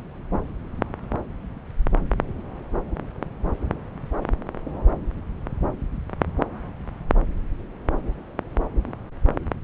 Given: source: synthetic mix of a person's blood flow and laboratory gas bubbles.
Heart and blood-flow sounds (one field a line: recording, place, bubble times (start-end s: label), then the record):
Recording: Doppler ultrasound of blood flow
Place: subclavian vein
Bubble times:
no bubbles
From the record:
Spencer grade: 0 (complete lack of bubble signals)